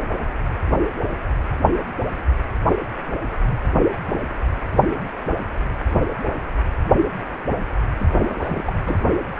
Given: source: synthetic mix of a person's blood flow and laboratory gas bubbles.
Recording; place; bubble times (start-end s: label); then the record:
Doppler ultrasound of blood flow; precordium
7.96-8.99 s: bubbles
From the record:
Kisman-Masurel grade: 211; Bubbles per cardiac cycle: several, 3 to 8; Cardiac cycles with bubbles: 1 to 10%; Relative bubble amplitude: barely perceptible (0.100 to 0.250); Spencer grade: 1 (occasional bubble signal discernible with the cardiac motion signal, with majority of cardiac periods free of bubbles); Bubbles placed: anywhere in the cardiac cycle